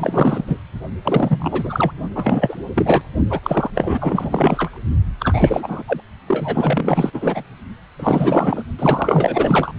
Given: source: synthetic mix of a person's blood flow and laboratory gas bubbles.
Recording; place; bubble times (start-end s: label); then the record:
Doppler ultrasound of blood flow; precordium
0.00-0.60 s: bubbles
1.03-1.92 s: bubbles
2.15-2.57 s: bubbles
2.75-3.02 s: bubbles
3.30-3.40 s: bubbles
3.43-3.71 s: bubbles
3.75-4.79 s: bubbles
5.20-5.83 s: bubbles
5.87-6.00 s: bubbles
6.27-7.45 s: bubbles
7.99-8.63 s: bubbles
8.79-9.72 s: bubbles
From the record:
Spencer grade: 4 (maximum detectable bubble signal sounding continuously throughout systole and diastole of every cardiac period, and overriding the amplitude of the normal cardiac signals); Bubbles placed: only in the low amplitude regions of the cardiac cycle